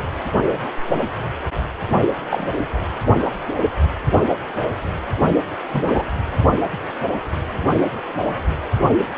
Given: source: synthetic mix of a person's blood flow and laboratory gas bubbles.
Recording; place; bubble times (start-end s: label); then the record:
Doppler ultrasound of blood flow; precordium
0.38-0.44 s: bubbles
2.30-2.46 s: bubbles
5.72-6.04 s: bubbles
From the record:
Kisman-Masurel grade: 122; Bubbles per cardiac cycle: 1 to 2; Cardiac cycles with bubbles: 10 to 50%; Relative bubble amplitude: moderate (0.250 to 0.450); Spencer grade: 2 (many but less than half of the cardiac periods contain bubble signals, singularly or in groups); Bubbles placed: only in the low amplitude regions of the cardiac cycle